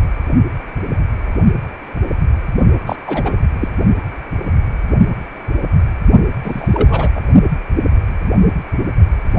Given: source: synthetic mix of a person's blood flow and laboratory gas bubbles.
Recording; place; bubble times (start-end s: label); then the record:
Doppler ultrasound of blood flow; precordium
2.86-2.96 s: bubbles
3.06-3.34 s: bubbles
3.60-3.68 s: bubbles
6.44-7.11 s: bubbles
7.16-7.21 s: bubbles
From the record:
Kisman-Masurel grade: 223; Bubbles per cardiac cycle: several, 3 to 8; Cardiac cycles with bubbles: 10 to 50%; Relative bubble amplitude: loud (0.450 to 0.775); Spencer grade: 2 (many but less than half of the cardiac periods contain bubble signals, singularly or in groups); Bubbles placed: only in the low amplitude regions of the cardiac cycle